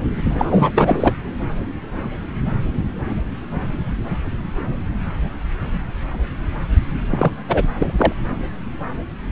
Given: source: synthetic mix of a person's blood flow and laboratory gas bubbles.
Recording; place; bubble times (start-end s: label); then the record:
Doppler ultrasound of blood flow; subclavian vein
0.25-0.71 s: bubbles
0.75-1.15 s: bubbles
7.10-7.31 s: bubbles
7.47-7.64 s: bubbles
7.79-7.92 s: bubbles
7.98-8.12 s: bubbles
From the record:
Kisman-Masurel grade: 223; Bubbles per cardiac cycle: several, 3 to 8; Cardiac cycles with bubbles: 10 to 50%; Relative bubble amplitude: loud (0.450 to 0.775); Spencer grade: 2 (many but less than half of the cardiac periods contain bubble signals, singularly or in groups); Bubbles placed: anywhere in the cardiac cycle